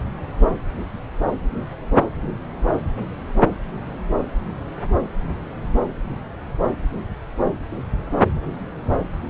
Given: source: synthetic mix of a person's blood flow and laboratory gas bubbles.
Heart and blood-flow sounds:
Doppler ultrasound of blood flow; subclavian vein
no bubbles
From the record:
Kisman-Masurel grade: 000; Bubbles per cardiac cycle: 0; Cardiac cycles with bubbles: 0%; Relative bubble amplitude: no bubbles discernible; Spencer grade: 0 (complete lack of bubble signals)

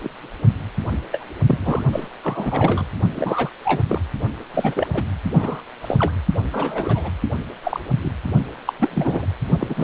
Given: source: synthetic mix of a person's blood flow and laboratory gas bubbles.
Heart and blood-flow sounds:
Doppler ultrasound of blood flow; precordium
0.03-0.09 s: bubbles
1.11-1.26 s: bubbles
1.47-1.83 s: bubbles
1.92-2.08 s: bubbles
2.23-2.86 s: bubbles
3.15-3.50 s: bubbles
3.65-3.83 s: bubbles
3.88-4.00 s: bubbles
4.54-4.87 s: bubbles
4.93-5.04 s: bubbles
5.33-5.62 s: bubbles
5.80-6.12 s: bubbles
6.52-7.10 s: bubbles
7.63-7.80 s: bubbles
8.02-8.11 s: bubbles
8.66-8.72 s: bubbles
8.79-9.26 s: bubbles
9.61-9.84 s: bubbles
From the record:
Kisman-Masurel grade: 232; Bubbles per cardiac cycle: several, 3 to 8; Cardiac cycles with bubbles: 50 to 99%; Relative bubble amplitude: moderate (0.250 to 0.450); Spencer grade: 3 (all of the cardiac periods contain showers or single bubble signals, but not dominating or overriding the cardiac motion signals); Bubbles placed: only in the low amplitude regions of the cardiac cycle

